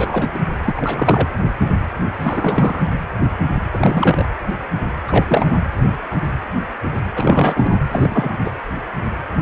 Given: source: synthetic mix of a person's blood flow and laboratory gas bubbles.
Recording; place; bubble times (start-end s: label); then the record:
Doppler ultrasound of blood flow; precordium
0.00-0.31 s: bubbles
0.34-0.38 s: bubbles
0.63-1.29 s: bubbles
2.21-2.83 s: bubbles
3.73-4.26 s: bubbles
5.08-5.62 s: bubbles
7.16-7.78 s: bubbles
7.89-8.29 s: bubbles
8.44-8.52 s: bubbles
From the record:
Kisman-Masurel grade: 333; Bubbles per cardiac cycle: rolling drumbeat, 9 or more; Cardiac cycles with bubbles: 50 to 99%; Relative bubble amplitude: loud (0.450 to 0.775); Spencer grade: 3 (all of the cardiac periods contain showers or single bubble signals, but not dominating or overriding the cardiac motion signals); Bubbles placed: anywhere in the cardiac cycle